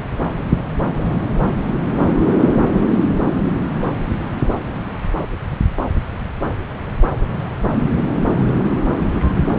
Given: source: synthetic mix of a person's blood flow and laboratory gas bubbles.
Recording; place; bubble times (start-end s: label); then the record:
Doppler ultrasound of blood flow; subclavian vein
no bubbles
From the record:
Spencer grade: 0 (complete lack of bubble signals)